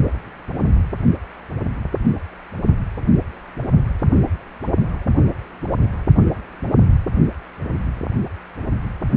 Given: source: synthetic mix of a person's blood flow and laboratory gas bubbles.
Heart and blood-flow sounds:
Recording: Doppler ultrasound of blood flow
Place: precordium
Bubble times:
no bubbles
From the record:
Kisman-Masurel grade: 000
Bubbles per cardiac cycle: 0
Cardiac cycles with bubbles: 0%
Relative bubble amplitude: no bubbles discernible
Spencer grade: 0 (complete lack of bubble signals)

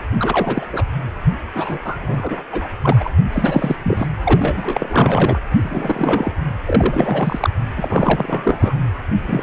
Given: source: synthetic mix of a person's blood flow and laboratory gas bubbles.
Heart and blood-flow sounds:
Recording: Doppler ultrasound of blood flow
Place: precordium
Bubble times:
0.18-0.66 s: bubbles
0.72-0.84 s: bubbles
1.54-1.78 s: bubbles
1.84-1.97 s: bubbles
2.02-2.43 s: bubbles
2.51-2.67 s: bubbles
2.81-3.10 s: bubbles
3.32-3.76 s: bubbles
3.83-4.06 s: bubbles
4.24-5.39 s: bubbles
5.61-6.33 s: bubbles
6.66-7.50 s: bubbles
7.76-8.79 s: bubbles
9.27-9.43 s: bubbles
From the record:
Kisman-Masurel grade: 343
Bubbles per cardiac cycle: rolling drumbeat, 9 or more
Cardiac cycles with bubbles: 100%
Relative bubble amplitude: loud (0.450 to 0.775)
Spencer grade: 3 (all of the cardiac periods contain showers or single bubble signals, but not dominating or overriding the cardiac motion signals)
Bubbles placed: anywhere in the cardiac cycle

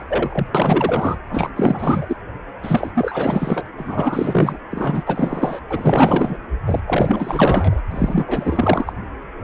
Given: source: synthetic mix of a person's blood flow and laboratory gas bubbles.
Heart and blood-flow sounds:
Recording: Doppler ultrasound of blood flow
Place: precordium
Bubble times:
0.00-0.04 s: bubbles
0.08-0.47 s: bubbles
0.54-1.18 s: bubbles
1.29-1.51 s: bubbles
1.55-2.17 s: bubbles
2.62-3.67 s: bubbles
3.77-4.58 s: bubbles
4.71-5.59 s: bubbles
5.69-6.37 s: bubbles
6.66-6.80 s: bubbles
6.87-7.82 s: bubbles
7.90-8.93 s: bubbles
9.41-9.44 s: bubbles
From the record:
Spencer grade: 4 (maximum detectable bubble signal sounding continuously throughout systole and diastole of every cardiac period, and overriding the amplitude of the normal cardiac signals)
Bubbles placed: anywhere in the cardiac cycle

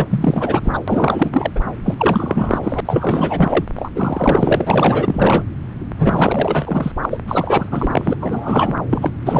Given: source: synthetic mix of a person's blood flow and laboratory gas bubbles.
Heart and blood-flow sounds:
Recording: Doppler ultrasound of blood flow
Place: subclavian vein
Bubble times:
0.00-0.60 s: bubbles
0.64-0.80 s: bubbles
0.88-1.51 s: bubbles
1.55-1.61 s: bubbles
1.85-1.95 s: bubbles
1.97-2.58 s: bubbles
2.62-2.80 s: bubbles
2.85-3.65 s: bubbles
3.76-3.91 s: bubbles
3.95-5.44 s: bubbles
5.98-6.92 s: bubbles
7.02-7.06 s: bubbles
7.11-7.21 s: bubbles
7.28-7.69 s: bubbles
7.72-8.17 s: bubbles
8.20-8.74 s: bubbles
8.91-9.10 s: bubbles
9.25-9.39 s: bubbles
From the record:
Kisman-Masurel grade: 444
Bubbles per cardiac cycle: continuous sound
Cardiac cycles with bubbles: 100%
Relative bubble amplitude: maximal (0.775 to 0.999)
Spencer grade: 4 (maximum detectable bubble signal sounding continuously throughout systole and diastole of every cardiac period, and overriding the amplitude of the normal cardiac signals)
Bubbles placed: anywhere in the cardiac cycle

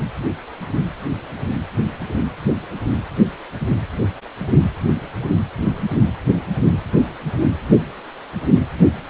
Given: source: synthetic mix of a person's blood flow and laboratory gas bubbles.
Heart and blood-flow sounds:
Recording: Doppler ultrasound of blood flow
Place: precordium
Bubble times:
no bubbles
From the record:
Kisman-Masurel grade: 000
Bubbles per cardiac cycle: 0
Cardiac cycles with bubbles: 0%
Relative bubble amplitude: no bubbles discernible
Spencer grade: 0 (complete lack of bubble signals)

